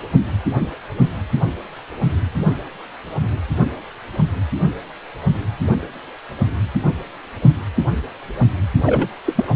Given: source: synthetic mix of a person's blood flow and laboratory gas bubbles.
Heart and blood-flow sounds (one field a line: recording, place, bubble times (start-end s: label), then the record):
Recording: Doppler ultrasound of blood flow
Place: precordium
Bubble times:
8.86-9.09 s: bubbles
9.25-9.45 s: bubbles
9.47-9.54 s: bubbles
From the record:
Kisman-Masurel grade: 213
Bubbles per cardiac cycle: several, 3 to 8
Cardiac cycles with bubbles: 1 to 10%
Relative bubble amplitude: loud (0.450 to 0.775)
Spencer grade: 1 (occasional bubble signal discernible with the cardiac motion signal, with majority of cardiac periods free of bubbles)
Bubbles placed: only in the low amplitude regions of the cardiac cycle